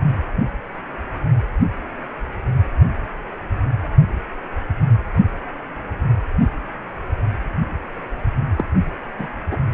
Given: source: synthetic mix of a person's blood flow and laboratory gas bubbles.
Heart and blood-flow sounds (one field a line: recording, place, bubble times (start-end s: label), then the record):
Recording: Doppler ultrasound of blood flow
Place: precordium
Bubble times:
8.57-8.65 s: bubbles
9.19-9.27 s: bubbles
9.51-9.57 s: bubbles
From the record:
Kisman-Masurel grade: 212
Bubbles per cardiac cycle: several, 3 to 8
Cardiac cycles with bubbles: 1 to 10%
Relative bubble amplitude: moderate (0.250 to 0.450)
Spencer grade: 1 (occasional bubble signal discernible with the cardiac motion signal, with majority of cardiac periods free of bubbles)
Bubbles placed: only in the low amplitude regions of the cardiac cycle